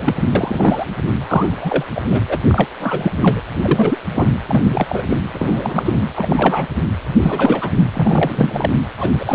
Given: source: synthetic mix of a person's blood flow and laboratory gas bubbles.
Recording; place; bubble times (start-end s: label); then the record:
Doppler ultrasound of blood flow; precordium
0.00-0.13 s: bubbles
0.35-0.85 s: bubbles
1.21-1.84 s: bubbles
1.95-2.02 s: bubbles
2.11-2.22 s: bubbles
2.28-2.38 s: bubbles
2.46-2.67 s: bubbles
2.80-3.12 s: bubbles
3.23-3.41 s: bubbles
3.59-3.98 s: bubbles
4.14-4.30 s: bubbles
4.48-5.02 s: bubbles
5.09-5.17 s: bubbles
5.32-6.01 s: bubbles
6.16-6.66 s: bubbles
7.20-7.70 s: bubbles
7.94-8.70 s: bubbles
8.97-9.10 s: bubbles
9.19-9.34 s: bubbles
From the record:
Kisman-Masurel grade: 343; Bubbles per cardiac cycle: rolling drumbeat, 9 or more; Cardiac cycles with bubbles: 100%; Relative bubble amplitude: loud (0.450 to 0.775); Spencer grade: 3 (all of the cardiac periods contain showers or single bubble signals, but not dominating or overriding the cardiac motion signals); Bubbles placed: anywhere in the cardiac cycle